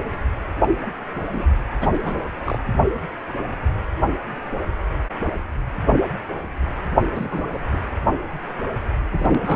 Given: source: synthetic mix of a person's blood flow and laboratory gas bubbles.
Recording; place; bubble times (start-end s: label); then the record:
Doppler ultrasound of blood flow; precordium
0.60-0.69 s: bubbles
0.82-0.87 s: bubbles
1.32-1.45 s: bubbles
1.80-2.27 s: bubbles
2.44-2.58 s: bubbles
7.11-7.44 s: bubbles
7.53-7.58 s: bubbles
7.73-7.80 s: bubbles
9.12-9.56 s: bubbles
From the record:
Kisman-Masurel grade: 221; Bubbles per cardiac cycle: several, 3 to 8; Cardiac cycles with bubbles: 10 to 50%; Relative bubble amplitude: barely perceptible (0.100 to 0.250); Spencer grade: 2 (many but less than half of the cardiac periods contain bubble signals, singularly or in groups); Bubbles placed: anywhere in the cardiac cycle